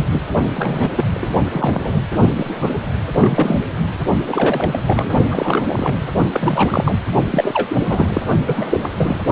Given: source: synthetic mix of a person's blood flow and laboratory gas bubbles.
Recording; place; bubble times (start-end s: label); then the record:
Doppler ultrasound of blood flow; precordium
0.00-0.07 s: bubbles
0.12-0.23 s: bubbles
0.54-1.04 s: bubbles
1.14-2.01 s: bubbles
2.35-2.70 s: bubbles
3.12-3.59 s: bubbles
4.26-4.79 s: bubbles
4.87-5.11 s: bubbles
5.31-6.06 s: bubbles
6.29-6.98 s: bubbles
7.31-8.21 s: bubbles
8.46-8.89 s: bubbles
8.96-9.24 s: bubbles
From the record:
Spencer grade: 3 (all of the cardiac periods contain showers or single bubble signals, but not dominating or overriding the cardiac motion signals); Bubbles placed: only in the low amplitude regions of the cardiac cycle